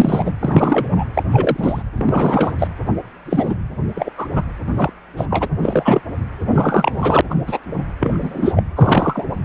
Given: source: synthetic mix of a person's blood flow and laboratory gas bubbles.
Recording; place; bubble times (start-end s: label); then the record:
Doppler ultrasound of blood flow; precordium
0.00-0.33 s: bubbles
0.40-0.88 s: bubbles
0.91-1.04 s: bubbles
1.14-1.23 s: bubbles
1.30-1.82 s: bubbles
1.97-2.53 s: bubbles
2.58-2.68 s: bubbles
3.25-3.54 s: bubbles
3.95-4.09 s: bubbles
4.17-4.27 s: bubbles
4.33-4.42 s: bubbles
4.75-4.92 s: bubbles
5.16-5.25 s: bubbles
5.30-5.47 s: bubbles
5.62-6.01 s: bubbles
6.50-7.21 s: bubbles
7.29-7.34 s: bubbles
7.46-7.58 s: bubbles
8.00-8.63 s: bubbles
8.76-9.26 s: bubbles
From the record:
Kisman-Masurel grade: 243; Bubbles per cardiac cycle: several, 3 to 8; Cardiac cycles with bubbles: 100%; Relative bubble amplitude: loud (0.450 to 0.775); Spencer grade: 3 (all of the cardiac periods contain showers or single bubble signals, but not dominating or overriding the cardiac motion signals); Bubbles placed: anywhere in the cardiac cycle